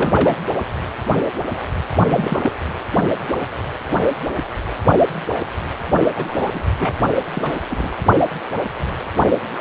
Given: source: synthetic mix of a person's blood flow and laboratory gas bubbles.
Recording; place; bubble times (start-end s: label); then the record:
Doppler ultrasound of blood flow; precordium
0.00-0.36 s: bubbles
2.07-2.51 s: bubbles
6.16-6.71 s: bubbles
6.79-6.93 s: bubbles
7.33-7.53 s: bubbles
7.70-7.92 s: bubbles
From the record:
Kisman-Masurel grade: 222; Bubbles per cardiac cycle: several, 3 to 8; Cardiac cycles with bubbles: 10 to 50%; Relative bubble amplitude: moderate (0.250 to 0.450); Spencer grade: 2 (many but less than half of the cardiac periods contain bubble signals, singularly or in groups); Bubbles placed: only in the low amplitude regions of the cardiac cycle